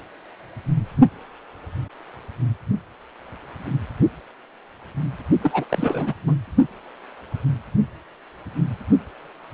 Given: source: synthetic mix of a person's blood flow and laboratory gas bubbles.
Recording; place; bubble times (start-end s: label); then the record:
Doppler ultrasound of blood flow; precordium
5.43-5.65 s: bubbles
5.69-6.13 s: bubbles
6.26-6.34 s: bubbles
From the record:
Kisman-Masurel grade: 212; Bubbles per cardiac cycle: several, 3 to 8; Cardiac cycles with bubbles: 1 to 10%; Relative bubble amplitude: moderate (0.250 to 0.450); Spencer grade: 1 (occasional bubble signal discernible with the cardiac motion signal, with majority of cardiac periods free of bubbles); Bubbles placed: only in the low amplitude regions of the cardiac cycle